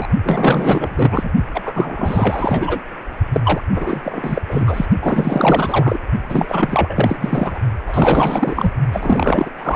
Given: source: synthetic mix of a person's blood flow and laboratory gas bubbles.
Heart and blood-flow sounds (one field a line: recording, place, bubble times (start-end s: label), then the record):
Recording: Doppler ultrasound of blood flow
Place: precordium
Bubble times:
0.00-0.07 s: bubbles
0.24-1.31 s: bubbles
1.54-1.62 s: bubbles
1.65-2.80 s: bubbles
3.33-3.41 s: bubbles
3.44-3.61 s: bubbles
3.71-4.00 s: bubbles
4.03-4.42 s: bubbles
4.48-4.85 s: bubbles
5.00-6.00 s: bubbles
6.29-7.58 s: bubbles
7.86-8.71 s: bubbles
8.92-9.51 s: bubbles
9.57-9.76 s: bubbles
From the record:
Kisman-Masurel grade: 444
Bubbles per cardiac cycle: continuous sound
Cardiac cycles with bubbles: 100%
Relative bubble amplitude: maximal (0.775 to 0.999)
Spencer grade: 4 (maximum detectable bubble signal sounding continuously throughout systole and diastole of every cardiac period, and overriding the amplitude of the normal cardiac signals)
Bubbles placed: only in the low amplitude regions of the cardiac cycle